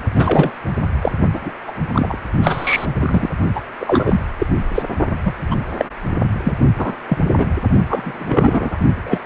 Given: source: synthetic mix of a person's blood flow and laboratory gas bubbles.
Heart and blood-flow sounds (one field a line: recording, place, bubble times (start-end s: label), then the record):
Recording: Doppler ultrasound of blood flow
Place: precordium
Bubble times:
0.15-0.51 s: bubbles
1.01-1.11 s: bubbles
1.33-1.51 s: bubbles
1.67-1.72 s: bubbles
1.91-2.17 s: bubbles
2.42-2.87 s: bubbles
3.00-3.29 s: bubbles
3.54-3.61 s: bubbles
3.79-4.21 s: bubbles
4.38-4.47 s: bubbles
4.75-4.83 s: bubbles
5.25-5.33 s: bubbles
5.50-5.55 s: bubbles
5.77-5.85 s: bubbles
6.44-6.54 s: bubbles
6.78-6.96 s: bubbles
7.08-7.17 s: bubbles
7.38-7.47 s: bubbles
7.87-8.25 s: bubbles
8.29-8.77 s: bubbles
9.05-9.19 s: bubbles
From the record:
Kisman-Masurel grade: 233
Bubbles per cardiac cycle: several, 3 to 8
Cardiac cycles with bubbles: 50 to 99%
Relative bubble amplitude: loud (0.450 to 0.775)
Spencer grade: 3 (all of the cardiac periods contain showers or single bubble signals, but not dominating or overriding the cardiac motion signals)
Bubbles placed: only in the low amplitude regions of the cardiac cycle